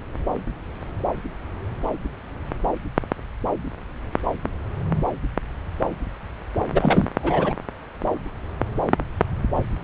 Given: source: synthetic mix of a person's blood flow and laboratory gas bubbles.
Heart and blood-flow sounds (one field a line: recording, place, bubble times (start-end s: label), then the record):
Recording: Doppler ultrasound of blood flow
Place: subclavian vein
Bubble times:
6.71-7.08 s: bubbles
7.23-7.53 s: bubbles
From the record:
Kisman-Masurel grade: 213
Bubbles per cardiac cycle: several, 3 to 8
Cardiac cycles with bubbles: 1 to 10%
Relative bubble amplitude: loud (0.450 to 0.775)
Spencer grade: 1 (occasional bubble signal discernible with the cardiac motion signal, with majority of cardiac periods free of bubbles)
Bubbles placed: anywhere in the cardiac cycle